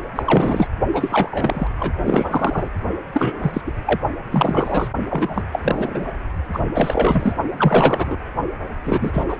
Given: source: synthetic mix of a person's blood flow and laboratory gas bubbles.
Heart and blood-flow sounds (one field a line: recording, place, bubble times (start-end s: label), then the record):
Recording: Doppler ultrasound of blood flow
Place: precordium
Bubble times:
0.15-0.67 s: bubbles
0.93-1.67 s: bubbles
1.79-1.92 s: bubbles
2.01-2.69 s: bubbles
3.12-3.61 s: bubbles
3.66-3.72 s: bubbles
3.86-3.99 s: bubbles
4.31-4.89 s: bubbles
5.10-5.45 s: bubbles
5.52-6.12 s: bubbles
6.53-6.60 s: bubbles
6.74-7.37 s: bubbles
7.57-8.16 s: bubbles
8.83-9.24 s: bubbles
9.29-9.37 s: bubbles
From the record:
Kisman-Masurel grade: 343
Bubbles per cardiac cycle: rolling drumbeat, 9 or more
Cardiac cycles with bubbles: 100%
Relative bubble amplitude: loud (0.450 to 0.775)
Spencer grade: 3 (all of the cardiac periods contain showers or single bubble signals, but not dominating or overriding the cardiac motion signals)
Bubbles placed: only in the low amplitude regions of the cardiac cycle